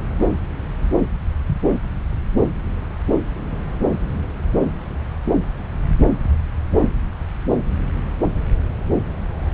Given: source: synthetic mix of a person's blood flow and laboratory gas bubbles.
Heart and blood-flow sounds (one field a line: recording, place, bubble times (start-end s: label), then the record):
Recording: Doppler ultrasound of blood flow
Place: subclavian vein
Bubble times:
no bubbles
From the record:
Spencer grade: 0 (complete lack of bubble signals)